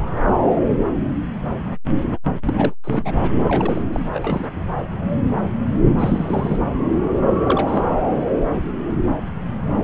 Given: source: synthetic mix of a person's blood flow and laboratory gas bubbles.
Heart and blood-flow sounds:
Doppler ultrasound of blood flow; subclavian vein
2.45-2.74 s: bubbles
2.83-3.12 s: bubbles
3.21-3.31 s: bubbles
3.43-3.83 s: bubbles
3.92-4.00 s: bubbles
4.12-4.52 s: bubbles
5.99-6.58 s: bubbles
7.45-7.85 s: bubbles
From the record:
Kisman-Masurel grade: 222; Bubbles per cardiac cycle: several, 3 to 8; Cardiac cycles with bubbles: 10 to 50%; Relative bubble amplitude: moderate (0.250 to 0.450); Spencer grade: 2 (many but less than half of the cardiac periods contain bubble signals, singularly or in groups); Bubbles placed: anywhere in the cardiac cycle

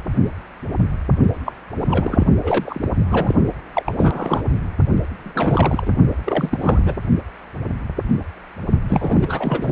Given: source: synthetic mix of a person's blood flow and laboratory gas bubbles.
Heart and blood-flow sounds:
Doppler ultrasound of blood flow; precordium
1.45-1.52 s: bubbles
1.78-2.26 s: bubbles
2.43-2.89 s: bubbles
3.10-3.35 s: bubbles
3.74-3.83 s: bubbles
3.85-3.94 s: bubbles
3.99-4.42 s: bubbles
5.23-5.92 s: bubbles
6.24-6.58 s: bubbles
6.61-6.95 s: bubbles
8.88-9.72 s: bubbles
From the record:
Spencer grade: 3 (all of the cardiac periods contain showers or single bubble signals, but not dominating or overriding the cardiac motion signals); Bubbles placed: only in the low amplitude regions of the cardiac cycle

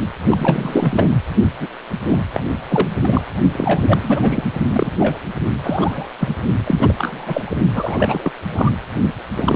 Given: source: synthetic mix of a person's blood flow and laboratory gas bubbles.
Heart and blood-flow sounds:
Doppler ultrasound of blood flow; precordium
0.28-1.09 s: bubbles
1.59-1.67 s: bubbles
2.03-2.18 s: bubbles
2.33-2.44 s: bubbles
2.69-2.89 s: bubbles
3.01-3.23 s: bubbles
3.53-3.81 s: bubbles
3.88-3.99 s: bubbles
4.01-4.43 s: bubbles
4.74-5.17 s: bubbles
5.63-6.08 s: bubbles
6.20-6.36 s: bubbles
6.66-6.94 s: bubbles
6.98-7.57 s: bubbles
7.74-8.32 s: bubbles
8.54-8.71 s: bubbles
9.36-9.55 s: bubbles
From the record:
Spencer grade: 3 (all of the cardiac periods contain showers or single bubble signals, but not dominating or overriding the cardiac motion signals); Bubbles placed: only in the low amplitude regions of the cardiac cycle

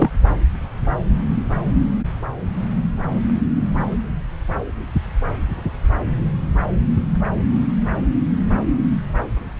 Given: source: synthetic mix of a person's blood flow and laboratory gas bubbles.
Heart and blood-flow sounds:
Doppler ultrasound of blood flow; subclavian vein
0.00-0.10 s: bubbles
From the record:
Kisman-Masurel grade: 213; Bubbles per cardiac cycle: several, 3 to 8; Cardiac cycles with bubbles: 1 to 10%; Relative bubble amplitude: loud (0.450 to 0.775); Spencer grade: 1 (occasional bubble signal discernible with the cardiac motion signal, with majority of cardiac periods free of bubbles); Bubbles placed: anywhere in the cardiac cycle

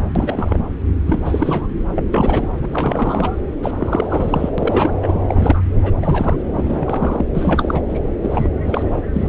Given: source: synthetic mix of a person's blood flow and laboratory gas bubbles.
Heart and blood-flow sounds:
Doppler ultrasound of blood flow; subclavian vein
0.15-0.59 s: bubbles
1.06-1.67 s: bubbles
1.94-2.06 s: bubbles
2.13-2.48 s: bubbles
2.61-3.30 s: bubbles
3.62-3.72 s: bubbles
3.77-4.50 s: bubbles
4.58-4.92 s: bubbles
5.02-5.62 s: bubbles
5.82-5.93 s: bubbles
6.01-6.36 s: bubbles
6.55-7.25 s: bubbles
7.34-7.82 s: bubbles
7.89-7.99 s: bubbles
8.22-8.50 s: bubbles
8.66-9.01 s: bubbles
9.12-9.28 s: bubbles
From the record:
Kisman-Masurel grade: 343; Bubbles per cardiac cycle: rolling drumbeat, 9 or more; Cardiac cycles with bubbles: 100%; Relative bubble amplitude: loud (0.450 to 0.775); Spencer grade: 3 (all of the cardiac periods contain showers or single bubble signals, but not dominating or overriding the cardiac motion signals); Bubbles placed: anywhere in the cardiac cycle

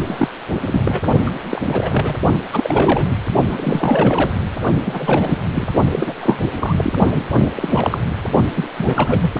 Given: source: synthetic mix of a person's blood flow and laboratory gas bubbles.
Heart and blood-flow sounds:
Doppler ultrasound of blood flow; precordium
0.06-0.28 s: bubbles
0.60-1.02 s: bubbles
1.25-1.30 s: bubbles
1.51-1.61 s: bubbles
1.65-2.15 s: bubbles
2.52-3.22 s: bubbles
3.49-4.33 s: bubbles
4.85-5.42 s: bubbles
5.53-5.68 s: bubbles
5.91-6.13 s: bubbles
6.20-6.39 s: bubbles
6.59-6.75 s: bubbles
6.78-6.92 s: bubbles
7.16-7.21 s: bubbles
7.56-8.01 s: bubbles
8.55-8.69 s: bubbles
8.77-9.32 s: bubbles
From the record:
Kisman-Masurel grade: 332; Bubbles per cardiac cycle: rolling drumbeat, 9 or more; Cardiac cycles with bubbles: 50 to 99%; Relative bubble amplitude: moderate (0.250 to 0.450); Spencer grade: 3 (all of the cardiac periods contain showers or single bubble signals, but not dominating or overriding the cardiac motion signals); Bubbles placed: only in the low amplitude regions of the cardiac cycle

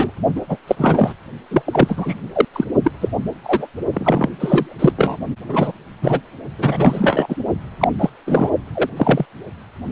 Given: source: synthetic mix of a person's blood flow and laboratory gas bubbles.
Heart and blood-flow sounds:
Doppler ultrasound of blood flow; precordium
0.00-0.11 s: bubbles
0.36-0.41 s: bubbles
0.49-0.57 s: bubbles
0.67-1.13 s: bubbles
1.50-1.62 s: bubbles
1.65-2.15 s: bubbles
2.34-2.45 s: bubbles
2.53-2.65 s: bubbles
2.83-2.91 s: bubbles
3.00-3.09 s: bubbles
3.44-3.67 s: bubbles
3.93-4.29 s: bubbles
4.40-4.92 s: bubbles
4.97-5.17 s: bubbles
5.49-5.72 s: bubbles
6.02-6.21 s: bubbles
6.58-7.35 s: bubbles
7.79-7.88 s: bubbles
7.99-8.10 s: bubbles
8.27-8.51 s: bubbles
8.75-8.90 s: bubbles
8.97-9.26 s: bubbles
From the record:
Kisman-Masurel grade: 243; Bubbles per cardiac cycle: several, 3 to 8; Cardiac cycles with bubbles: 100%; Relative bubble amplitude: loud (0.450 to 0.775); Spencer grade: 3 (all of the cardiac periods contain showers or single bubble signals, but not dominating or overriding the cardiac motion signals); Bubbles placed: only in the low amplitude regions of the cardiac cycle

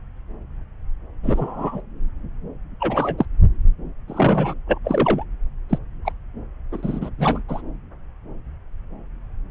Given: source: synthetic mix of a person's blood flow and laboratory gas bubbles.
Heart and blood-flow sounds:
Doppler ultrasound of blood flow; subclavian vein
1.23-1.80 s: bubbles
2.79-3.26 s: bubbles
4.07-4.54 s: bubbles
4.67-4.78 s: bubbles
4.84-5.23 s: bubbles
5.69-5.78 s: bubbles
6.05-6.12 s: bubbles
6.71-7.09 s: bubbles
7.18-7.42 s: bubbles
7.48-7.61 s: bubbles
From the record:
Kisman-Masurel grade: 232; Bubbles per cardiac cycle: several, 3 to 8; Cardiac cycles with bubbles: 50 to 99%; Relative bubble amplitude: moderate (0.250 to 0.450); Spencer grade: 3 (all of the cardiac periods contain showers or single bubble signals, but not dominating or overriding the cardiac motion signals); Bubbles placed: anywhere in the cardiac cycle

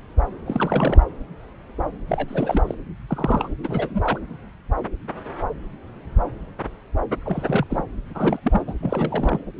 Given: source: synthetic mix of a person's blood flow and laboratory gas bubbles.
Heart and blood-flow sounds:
Doppler ultrasound of blood flow; subclavian vein
0.46-1.04 s: bubbles
2.08-2.62 s: bubbles
2.67-2.75 s: bubbles
3.08-3.48 s: bubbles
3.63-4.19 s: bubbles
7.25-7.67 s: bubbles
7.70-7.83 s: bubbles
8.14-8.39 s: bubbles
8.43-8.62 s: bubbles
8.66-8.73 s: bubbles
8.82-9.40 s: bubbles
From the record:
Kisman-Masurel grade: 232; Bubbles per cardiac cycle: several, 3 to 8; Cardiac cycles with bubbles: 50 to 99%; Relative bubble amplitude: moderate (0.250 to 0.450); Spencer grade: 3 (all of the cardiac periods contain showers or single bubble signals, but not dominating or overriding the cardiac motion signals); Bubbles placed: anywhere in the cardiac cycle

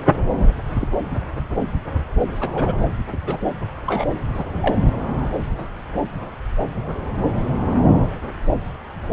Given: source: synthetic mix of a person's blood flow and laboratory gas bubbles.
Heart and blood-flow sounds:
Doppler ultrasound of blood flow; subclavian vein
0.75-0.88 s: bubbles
2.41-2.50 s: bubbles
2.54-2.73 s: bubbles
3.08-3.17 s: bubbles
3.26-3.38 s: bubbles
3.86-4.19 s: bubbles
4.33-4.44 s: bubbles
4.61-4.76 s: bubbles
From the record:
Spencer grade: 2 (many but less than half of the cardiac periods contain bubble signals, singularly or in groups); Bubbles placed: anywhere in the cardiac cycle

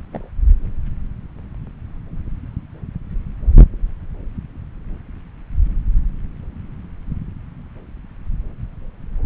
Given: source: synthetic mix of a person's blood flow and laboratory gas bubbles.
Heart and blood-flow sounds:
Doppler ultrasound of blood flow; subclavian vein
0.12-0.28 s: bubbles
From the record:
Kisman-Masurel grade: 111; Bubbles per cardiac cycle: 1 to 2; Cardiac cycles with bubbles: 1 to 10%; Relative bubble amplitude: barely perceptible (0.100 to 0.250); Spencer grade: 1 (occasional bubble signal discernible with the cardiac motion signal, with majority of cardiac periods free of bubbles); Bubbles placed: anywhere in the cardiac cycle

